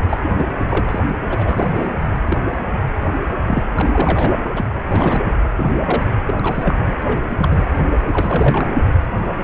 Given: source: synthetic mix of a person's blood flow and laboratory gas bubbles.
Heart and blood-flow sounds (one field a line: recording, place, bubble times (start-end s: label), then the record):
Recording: Doppler ultrasound of blood flow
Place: precordium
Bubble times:
0.09-0.17 s: bubbles
0.21-0.30 s: bubbles
0.38-0.64 s: bubbles
0.68-0.99 s: bubbles
1.29-1.91 s: bubbles
2.29-2.40 s: bubbles
3.48-3.65 s: bubbles
3.76-4.33 s: bubbles
4.45-4.49 s: bubbles
4.55-4.66 s: bubbles
4.69-4.84 s: bubbles
4.92-5.23 s: bubbles
5.57-5.73 s: bubbles
5.85-6.03 s: bubbles
6.27-6.33 s: bubbles
6.38-6.75 s: bubbles
6.87-6.94 s: bubbles
7.04-7.22 s: bubbles
7.29-7.72 s: bubbles
8.12-8.71 s: bubbles
9.38-9.43 s: bubbles
From the record:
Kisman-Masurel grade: 332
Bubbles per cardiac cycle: rolling drumbeat, 9 or more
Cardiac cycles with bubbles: 50 to 99%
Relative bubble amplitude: moderate (0.250 to 0.450)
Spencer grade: 3 (all of the cardiac periods contain showers or single bubble signals, but not dominating or overriding the cardiac motion signals)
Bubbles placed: anywhere in the cardiac cycle